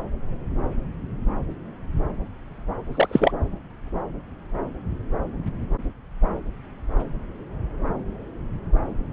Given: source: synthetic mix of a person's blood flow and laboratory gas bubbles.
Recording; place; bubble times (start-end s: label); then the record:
Doppler ultrasound of blood flow; subclavian vein
2.92-3.31 s: bubbles
From the record:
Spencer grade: 1 (occasional bubble signal discernible with the cardiac motion signal, with majority of cardiac periods free of bubbles); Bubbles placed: anywhere in the cardiac cycle